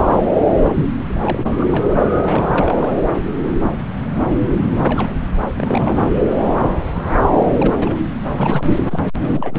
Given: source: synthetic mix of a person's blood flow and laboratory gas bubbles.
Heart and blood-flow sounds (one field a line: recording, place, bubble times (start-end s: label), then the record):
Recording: Doppler ultrasound of blood flow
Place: subclavian vein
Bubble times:
0.69-0.86 s: bubbles
1.08-1.66 s: bubbles
1.72-1.84 s: bubbles
2.01-2.21 s: bubbles
2.28-2.91 s: bubbles
4.87-5.17 s: bubbles
5.56-6.12 s: bubbles
7.59-8.05 s: bubbles
8.26-8.70 s: bubbles
8.90-9.01 s: bubbles
9.14-9.59 s: bubbles
From the record:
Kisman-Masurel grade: 332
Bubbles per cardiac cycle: rolling drumbeat, 9 or more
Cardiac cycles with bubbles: 50 to 99%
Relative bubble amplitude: moderate (0.250 to 0.450)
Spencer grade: 3 (all of the cardiac periods contain showers or single bubble signals, but not dominating or overriding the cardiac motion signals)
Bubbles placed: anywhere in the cardiac cycle